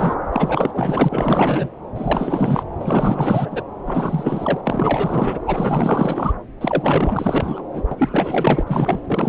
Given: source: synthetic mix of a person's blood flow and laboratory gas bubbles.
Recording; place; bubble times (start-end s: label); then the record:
Doppler ultrasound of blood flow; subclavian vein
0.00-0.15 s: bubbles
0.32-1.69 s: bubbles
1.95-2.63 s: bubbles
2.79-3.63 s: bubbles
3.86-4.60 s: bubbles
4.63-5.38 s: bubbles
5.46-6.33 s: bubbles
6.60-7.62 s: bubbles
7.73-7.83 s: bubbles
7.91-8.63 s: bubbles
8.67-9.00 s: bubbles
9.04-9.29 s: bubbles
From the record:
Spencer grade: 4 (maximum detectable bubble signal sounding continuously throughout systole and diastole of every cardiac period, and overriding the amplitude of the normal cardiac signals); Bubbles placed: anywhere in the cardiac cycle